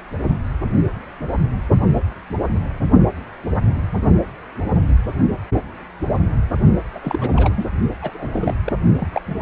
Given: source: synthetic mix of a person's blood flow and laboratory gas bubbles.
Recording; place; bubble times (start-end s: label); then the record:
Doppler ultrasound of blood flow; precordium
6.94-6.99 s: bubbles
7.02-7.31 s: bubbles
7.36-7.72 s: bubbles
8.02-8.11 s: bubbles
8.13-8.54 s: bubbles
8.64-8.72 s: bubbles
8.96-9.21 s: bubbles
9.28-9.35 s: bubbles
From the record:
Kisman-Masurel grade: 222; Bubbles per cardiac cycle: several, 3 to 8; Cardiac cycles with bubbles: 10 to 50%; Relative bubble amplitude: moderate (0.250 to 0.450); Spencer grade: 2 (many but less than half of the cardiac periods contain bubble signals, singularly or in groups); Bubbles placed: only in the low amplitude regions of the cardiac cycle